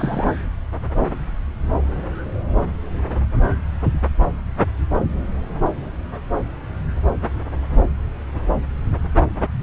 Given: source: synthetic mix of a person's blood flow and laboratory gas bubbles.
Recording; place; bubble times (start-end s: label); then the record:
Doppler ultrasound of blood flow; subclavian vein
0.00-0.28 s: bubbles
From the record:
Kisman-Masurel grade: 211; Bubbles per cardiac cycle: several, 3 to 8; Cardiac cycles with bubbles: 1 to 10%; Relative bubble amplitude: barely perceptible (0.100 to 0.250); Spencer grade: 1 (occasional bubble signal discernible with the cardiac motion signal, with majority of cardiac periods free of bubbles); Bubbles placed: anywhere in the cardiac cycle